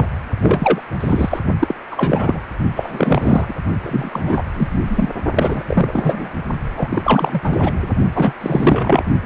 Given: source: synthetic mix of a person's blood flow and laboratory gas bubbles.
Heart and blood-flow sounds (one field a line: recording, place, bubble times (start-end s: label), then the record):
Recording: Doppler ultrasound of blood flow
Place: precordium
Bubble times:
0.00-0.07 s: bubbles
0.42-0.81 s: bubbles
1.00-1.40 s: bubbles
1.59-1.75 s: bubbles
1.91-2.41 s: bubbles
2.75-3.56 s: bubbles
3.83-4.43 s: bubbles
4.53-4.79 s: bubbles
4.87-5.09 s: bubbles
5.34-5.63 s: bubbles
5.67-6.30 s: bubbles
6.77-7.41 s: bubbles
7.43-7.92 s: bubbles
8.13-8.33 s: bubbles
8.40-9.03 s: bubbles
From the record:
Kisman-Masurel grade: 343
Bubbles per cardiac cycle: rolling drumbeat, 9 or more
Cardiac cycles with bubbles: 100%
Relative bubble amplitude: loud (0.450 to 0.775)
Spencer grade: 3 (all of the cardiac periods contain showers or single bubble signals, but not dominating or overriding the cardiac motion signals)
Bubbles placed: only in the low amplitude regions of the cardiac cycle